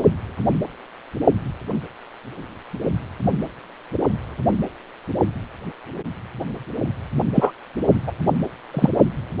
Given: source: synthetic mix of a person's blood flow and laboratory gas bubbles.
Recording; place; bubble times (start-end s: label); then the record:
Doppler ultrasound of blood flow; precordium
7.34-7.52 s: bubbles
8.07-8.12 s: bubbles
8.73-8.89 s: bubbles
From the record:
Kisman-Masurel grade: 213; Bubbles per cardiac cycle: several, 3 to 8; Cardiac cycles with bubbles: 1 to 10%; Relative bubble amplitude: loud (0.450 to 0.775); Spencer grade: 1 (occasional bubble signal discernible with the cardiac motion signal, with majority of cardiac periods free of bubbles); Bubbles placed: only in the low amplitude regions of the cardiac cycle